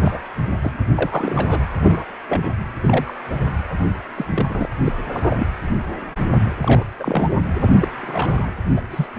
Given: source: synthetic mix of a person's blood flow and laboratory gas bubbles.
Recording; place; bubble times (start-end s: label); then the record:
Doppler ultrasound of blood flow; precordium
0.01-0.20 s: bubbles
0.61-0.71 s: bubbles
0.96-1.64 s: bubbles
1.82-2.05 s: bubbles
2.28-2.54 s: bubbles
2.83-3.13 s: bubbles
4.15-4.25 s: bubbles
4.30-4.67 s: bubbles
4.84-4.92 s: bubbles
5.12-5.46 s: bubbles
6.61-6.84 s: bubbles
6.99-7.35 s: bubbles
7.58-7.68 s: bubbles
7.78-7.87 s: bubbles
8.02-8.50 s: bubbles
8.76-8.82 s: bubbles
8.91-9.07 s: bubbles
From the record:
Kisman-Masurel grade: 232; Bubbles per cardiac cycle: several, 3 to 8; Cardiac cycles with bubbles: 50 to 99%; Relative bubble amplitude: moderate (0.250 to 0.450); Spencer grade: 3 (all of the cardiac periods contain showers or single bubble signals, but not dominating or overriding the cardiac motion signals); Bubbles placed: anywhere in the cardiac cycle